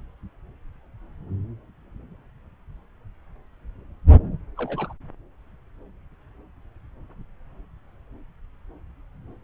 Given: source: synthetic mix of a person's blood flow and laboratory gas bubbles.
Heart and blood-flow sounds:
Doppler ultrasound of blood flow; subclavian vein
4.57-4.92 s: bubbles
From the record:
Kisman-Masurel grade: 121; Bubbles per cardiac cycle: 1 to 2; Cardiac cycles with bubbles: 10 to 50%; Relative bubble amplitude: barely perceptible (0.100 to 0.250); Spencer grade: 2 (many but less than half of the cardiac periods contain bubble signals, singularly or in groups); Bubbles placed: anywhere in the cardiac cycle

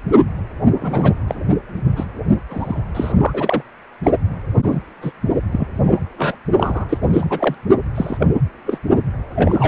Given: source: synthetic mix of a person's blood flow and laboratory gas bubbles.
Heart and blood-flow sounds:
Doppler ultrasound of blood flow; precordium
0.81-1.14 s: bubbles
1.27-1.35 s: bubbles
1.96-2.06 s: bubbles
2.49-2.81 s: bubbles
2.95-3.12 s: bubbles
3.16-3.62 s: bubbles
4.03-4.11 s: bubbles
4.62-4.79 s: bubbles
5.02-5.12 s: bubbles
5.52-5.67 s: bubbles
5.86-6.00 s: bubbles
6.17-6.37 s: bubbles
6.57-6.86 s: bubbles
6.88-6.98 s: bubbles
7.13-7.54 s: bubbles
7.67-7.75 s: bubbles
7.95-8.26 s: bubbles
8.66-8.79 s: bubbles
9.35-9.68 s: bubbles
From the record:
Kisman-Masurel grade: 242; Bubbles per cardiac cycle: several, 3 to 8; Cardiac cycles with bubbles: 100%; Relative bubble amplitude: moderate (0.250 to 0.450); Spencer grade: 3 (all of the cardiac periods contain showers or single bubble signals, but not dominating or overriding the cardiac motion signals); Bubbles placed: anywhere in the cardiac cycle

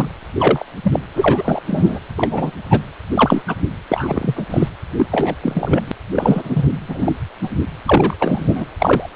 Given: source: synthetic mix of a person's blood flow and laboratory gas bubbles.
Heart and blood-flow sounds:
Doppler ultrasound of blood flow; precordium
0.00-0.08 s: bubbles
0.39-0.66 s: bubbles
0.82-1.00 s: bubbles
1.14-1.62 s: bubbles
1.67-1.99 s: bubbles
2.16-2.51 s: bubbles
2.69-2.81 s: bubbles
3.14-3.42 s: bubbles
3.47-3.56 s: bubbles
3.89-4.44 s: bubbles
4.50-4.69 s: bubbles
4.97-5.06 s: bubbles
5.11-5.35 s: bubbles
5.43-5.81 s: bubbles
5.88-5.92 s: bubbles
6.15-6.77 s: bubbles
6.88-7.14 s: bubbles
7.42-7.49 s: bubbles
7.87-8.17 s: bubbles
8.20-8.66 s: bubbles
8.79-9.10 s: bubbles
9.14-9.16 s: bubbles
From the record:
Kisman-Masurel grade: 243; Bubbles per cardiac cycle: several, 3 to 8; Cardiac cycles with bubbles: 100%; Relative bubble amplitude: loud (0.450 to 0.775); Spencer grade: 3 (all of the cardiac periods contain showers or single bubble signals, but not dominating or overriding the cardiac motion signals); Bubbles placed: anywhere in the cardiac cycle

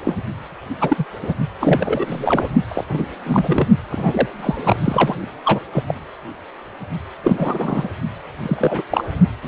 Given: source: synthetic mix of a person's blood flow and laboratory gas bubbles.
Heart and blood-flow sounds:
Doppler ultrasound of blood flow; precordium
0.05-0.16 s: bubbles
0.80-1.04 s: bubbles
1.22-1.34 s: bubbles
1.60-2.48 s: bubbles
2.68-2.84 s: bubbles
2.89-3.06 s: bubbles
3.25-3.68 s: bubbles
3.90-4.27 s: bubbles
4.39-5.16 s: bubbles
5.45-5.60 s: bubbles
5.72-5.83 s: bubbles
5.88-5.95 s: bubbles
7.23-7.88 s: bubbles
8.42-8.83 s: bubbles
8.90-9.04 s: bubbles
9.43-9.47 s: bubbles
From the record:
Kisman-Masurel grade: 233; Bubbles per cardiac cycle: several, 3 to 8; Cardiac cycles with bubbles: 50 to 99%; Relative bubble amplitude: loud (0.450 to 0.775); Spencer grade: 3 (all of the cardiac periods contain showers or single bubble signals, but not dominating or overriding the cardiac motion signals); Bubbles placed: only in the low amplitude regions of the cardiac cycle

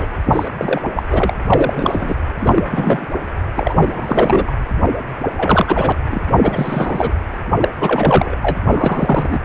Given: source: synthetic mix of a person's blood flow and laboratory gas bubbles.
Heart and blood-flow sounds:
Doppler ultrasound of blood flow; precordium
0.00-0.07 s: bubbles
0.25-0.48 s: bubbles
0.58-0.81 s: bubbles
0.94-1.03 s: bubbles
1.10-1.33 s: bubbles
1.46-2.15 s: bubbles
2.40-3.06 s: bubbles
3.56-4.57 s: bubbles
5.37-5.97 s: bubbles
6.12-6.25 s: bubbles
6.42-7.12 s: bubbles
7.60-7.69 s: bubbles
7.80-8.35 s: bubbles
8.42-8.57 s: bubbles
8.71-9.40 s: bubbles
From the record:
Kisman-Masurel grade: 343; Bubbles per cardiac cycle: rolling drumbeat, 9 or more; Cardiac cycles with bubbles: 100%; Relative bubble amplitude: loud (0.450 to 0.775); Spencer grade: 3 (all of the cardiac periods contain showers or single bubble signals, but not dominating or overriding the cardiac motion signals); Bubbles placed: anywhere in the cardiac cycle

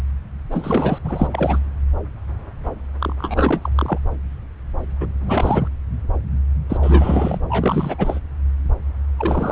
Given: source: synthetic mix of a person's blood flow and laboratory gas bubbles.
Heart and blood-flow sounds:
Doppler ultrasound of blood flow; subclavian vein
0.51-0.98 s: bubbles
1.04-1.28 s: bubbles
1.32-1.59 s: bubbles
3.00-3.13 s: bubbles
3.18-3.69 s: bubbles
3.75-3.98 s: bubbles
5.00-5.08 s: bubbles
5.26-5.67 s: bubbles
6.69-7.38 s: bubbles
7.49-8.20 s: bubbles
9.17-9.52 s: bubbles
From the record:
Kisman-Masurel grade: 333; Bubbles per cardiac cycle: rolling drumbeat, 9 or more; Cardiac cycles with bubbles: 50 to 99%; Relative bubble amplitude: loud (0.450 to 0.775); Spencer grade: 3 (all of the cardiac periods contain showers or single bubble signals, but not dominating or overriding the cardiac motion signals); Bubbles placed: anywhere in the cardiac cycle

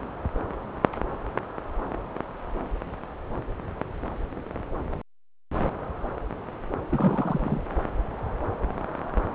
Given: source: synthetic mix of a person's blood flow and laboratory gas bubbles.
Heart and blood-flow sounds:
Doppler ultrasound of blood flow; subclavian vein
6.90-7.61 s: bubbles
From the record:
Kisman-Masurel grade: 211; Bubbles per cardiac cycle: several, 3 to 8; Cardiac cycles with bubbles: 1 to 10%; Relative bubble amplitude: barely perceptible (0.100 to 0.250); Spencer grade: 1 (occasional bubble signal discernible with the cardiac motion signal, with majority of cardiac periods free of bubbles); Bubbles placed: anywhere in the cardiac cycle

